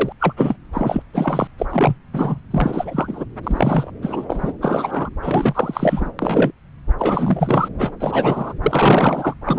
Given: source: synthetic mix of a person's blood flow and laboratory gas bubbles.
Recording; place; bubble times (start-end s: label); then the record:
Doppler ultrasound of blood flow; subclavian vein
0.00-0.12 s: bubbles
0.20-0.33 s: bubbles
0.36-0.56 s: bubbles
0.72-1.02 s: bubbles
1.13-1.47 s: bubbles
1.58-1.66 s: bubbles
1.69-1.96 s: bubbles
2.13-2.39 s: bubbles
2.50-3.25 s: bubbles
3.43-3.90 s: bubbles
4.02-4.26 s: bubbles
4.29-4.53 s: bubbles
4.60-5.09 s: bubbles
5.21-6.11 s: bubbles
6.19-6.51 s: bubbles
6.99-7.68 s: bubbles
7.78-7.91 s: bubbles
7.99-8.54 s: bubbles
8.62-9.34 s: bubbles
9.45-9.59 s: bubbles
From the record:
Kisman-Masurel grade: 333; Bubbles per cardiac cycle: rolling drumbeat, 9 or more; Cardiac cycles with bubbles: 50 to 99%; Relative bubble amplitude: loud (0.450 to 0.775); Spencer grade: 3 (all of the cardiac periods contain showers or single bubble signals, but not dominating or overriding the cardiac motion signals); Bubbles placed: anywhere in the cardiac cycle